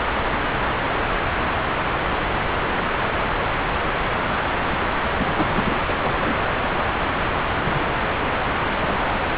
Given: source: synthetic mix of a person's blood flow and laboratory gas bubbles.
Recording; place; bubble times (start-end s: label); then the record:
Doppler ultrasound of blood flow; subclavian vein
4.70-4.84 s: bubbles
5.08-5.34 s: bubbles
5.39-5.83 s: bubbles
5.88-5.93 s: bubbles
6.01-6.36 s: bubbles
7.58-7.84 s: bubbles
8.76-9.20 s: bubbles
From the record:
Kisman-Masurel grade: 221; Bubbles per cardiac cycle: several, 3 to 8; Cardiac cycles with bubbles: 10 to 50%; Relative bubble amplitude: barely perceptible (0.100 to 0.250); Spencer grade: 2 (many but less than half of the cardiac periods contain bubble signals, singularly or in groups); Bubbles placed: anywhere in the cardiac cycle